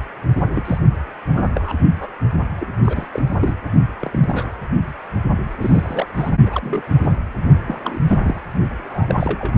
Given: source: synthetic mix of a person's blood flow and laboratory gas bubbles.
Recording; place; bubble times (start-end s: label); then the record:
Doppler ultrasound of blood flow; precordium
0.36-0.41 s: bubbles
0.55-0.78 s: bubbles
1.33-1.51 s: bubbles
1.54-1.73 s: bubbles
1.99-2.10 s: bubbles
2.60-2.68 s: bubbles
2.85-3.07 s: bubbles
3.12-3.22 s: bubbles
3.40-3.55 s: bubbles
4.00-4.51 s: bubbles
5.60-6.30 s: bubbles
6.46-6.83 s: bubbles
7.03-7.14 s: bubbles
7.66-8.41 s: bubbles
8.84-9.54 s: bubbles
From the record:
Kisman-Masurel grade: 242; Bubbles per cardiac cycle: several, 3 to 8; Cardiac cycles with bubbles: 100%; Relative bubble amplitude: moderate (0.250 to 0.450); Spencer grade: 3 (all of the cardiac periods contain showers or single bubble signals, but not dominating or overriding the cardiac motion signals); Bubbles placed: only in the low amplitude regions of the cardiac cycle